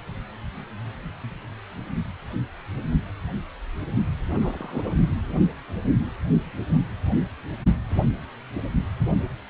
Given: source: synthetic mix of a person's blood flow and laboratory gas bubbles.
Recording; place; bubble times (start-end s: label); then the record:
Doppler ultrasound of blood flow; precordium
4.27-4.93 s: bubbles
From the record:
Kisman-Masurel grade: 211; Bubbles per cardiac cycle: several, 3 to 8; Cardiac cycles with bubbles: 1 to 10%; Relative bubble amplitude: barely perceptible (0.100 to 0.250); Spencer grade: 1 (occasional bubble signal discernible with the cardiac motion signal, with majority of cardiac periods free of bubbles); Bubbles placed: only in the low amplitude regions of the cardiac cycle